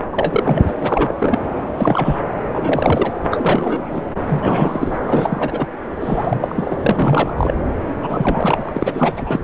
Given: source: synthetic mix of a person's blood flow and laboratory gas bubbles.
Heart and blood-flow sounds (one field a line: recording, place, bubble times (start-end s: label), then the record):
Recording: Doppler ultrasound of blood flow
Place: subclavian vein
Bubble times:
0.12-0.64 s: bubbles
0.67-0.73 s: bubbles
0.81-1.15 s: bubbles
1.19-1.45 s: bubbles
1.74-2.21 s: bubbles
2.48-3.12 s: bubbles
3.31-4.04 s: bubbles
4.28-4.98 s: bubbles
5.07-5.67 s: bubbles
6.00-6.76 s: bubbles
6.84-7.33 s: bubbles
7.37-7.54 s: bubbles
8.00-8.72 s: bubbles
8.76-9.40 s: bubbles
From the record:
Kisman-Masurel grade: 342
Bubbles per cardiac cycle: rolling drumbeat, 9 or more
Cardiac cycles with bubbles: 100%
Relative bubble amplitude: moderate (0.250 to 0.450)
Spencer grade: 3 (all of the cardiac periods contain showers or single bubble signals, but not dominating or overriding the cardiac motion signals)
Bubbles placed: anywhere in the cardiac cycle